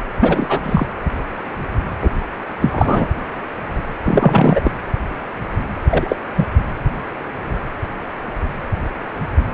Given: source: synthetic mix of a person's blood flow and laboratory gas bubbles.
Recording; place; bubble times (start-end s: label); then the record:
Doppler ultrasound of blood flow; precordium
0.21-0.59 s: bubbles
0.64-0.85 s: bubbles
2.02-2.09 s: bubbles
2.60-3.07 s: bubbles
4.04-4.61 s: bubbles
4.64-4.71 s: bubbles
5.89-6.16 s: bubbles
6.35-6.46 s: bubbles
From the record:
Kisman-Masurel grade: 223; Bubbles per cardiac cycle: several, 3 to 8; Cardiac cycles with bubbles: 10 to 50%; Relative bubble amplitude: loud (0.450 to 0.775); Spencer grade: 2 (many but less than half of the cardiac periods contain bubble signals, singularly or in groups); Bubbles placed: anywhere in the cardiac cycle